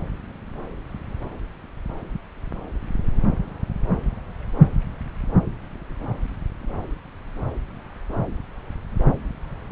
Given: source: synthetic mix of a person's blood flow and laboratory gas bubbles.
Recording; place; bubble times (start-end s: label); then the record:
Doppler ultrasound of blood flow; subclavian vein
no bubbles
From the record:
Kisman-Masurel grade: 000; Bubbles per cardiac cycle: 0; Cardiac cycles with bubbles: 0%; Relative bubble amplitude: no bubbles discernible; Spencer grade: 0 (complete lack of bubble signals)